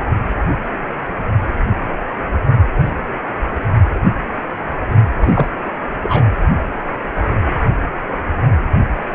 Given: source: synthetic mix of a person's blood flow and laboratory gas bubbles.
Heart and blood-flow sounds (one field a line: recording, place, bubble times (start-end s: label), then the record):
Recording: Doppler ultrasound of blood flow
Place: precordium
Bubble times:
5.20-5.47 s: bubbles
6.02-6.25 s: bubbles
From the record:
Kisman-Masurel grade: 213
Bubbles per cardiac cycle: several, 3 to 8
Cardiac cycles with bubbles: 1 to 10%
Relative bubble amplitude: loud (0.450 to 0.775)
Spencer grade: 1 (occasional bubble signal discernible with the cardiac motion signal, with majority of cardiac periods free of bubbles)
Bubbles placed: anywhere in the cardiac cycle